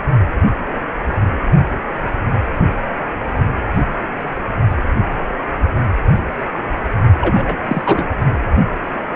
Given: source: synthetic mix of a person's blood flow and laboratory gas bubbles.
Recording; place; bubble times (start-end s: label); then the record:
Doppler ultrasound of blood flow; precordium
7.21-7.57 s: bubbles
7.65-8.12 s: bubbles
From the record:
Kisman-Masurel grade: 222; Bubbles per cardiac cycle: several, 3 to 8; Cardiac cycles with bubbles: 10 to 50%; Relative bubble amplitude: moderate (0.250 to 0.450); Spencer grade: 2 (many but less than half of the cardiac periods contain bubble signals, singularly or in groups); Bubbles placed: only in the low amplitude regions of the cardiac cycle